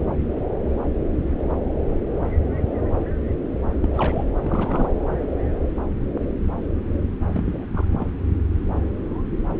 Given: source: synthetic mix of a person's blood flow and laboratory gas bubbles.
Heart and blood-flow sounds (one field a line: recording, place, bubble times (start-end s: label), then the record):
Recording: Doppler ultrasound of blood flow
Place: subclavian vein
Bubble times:
3.82-4.25 s: bubbles
4.44-4.92 s: bubbles
7.33-7.66 s: bubbles
7.73-7.85 s: bubbles
7.92-8.06 s: bubbles
From the record:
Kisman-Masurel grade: 221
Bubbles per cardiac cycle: several, 3 to 8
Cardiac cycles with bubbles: 10 to 50%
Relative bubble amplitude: barely perceptible (0.100 to 0.250)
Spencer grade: 2 (many but less than half of the cardiac periods contain bubble signals, singularly or in groups)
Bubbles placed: anywhere in the cardiac cycle